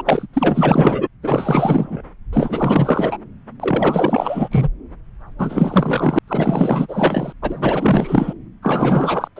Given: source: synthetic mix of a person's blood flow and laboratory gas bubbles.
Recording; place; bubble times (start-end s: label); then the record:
Doppler ultrasound of blood flow; subclavian vein
0.00-0.02 s: bubbles
0.05-0.27 s: bubbles
0.33-1.08 s: bubbles
1.23-2.02 s: bubbles
2.33-3.17 s: bubbles
3.60-4.49 s: bubbles
4.51-4.69 s: bubbles
5.38-6.19 s: bubbles
6.28-7.33 s: bubbles
7.42-8.33 s: bubbles
8.62-9.28 s: bubbles
9.36-9.39 s: bubbles
From the record:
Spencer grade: 4 (maximum detectable bubble signal sounding continuously throughout systole and diastole of every cardiac period, and overriding the amplitude of the normal cardiac signals); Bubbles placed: anywhere in the cardiac cycle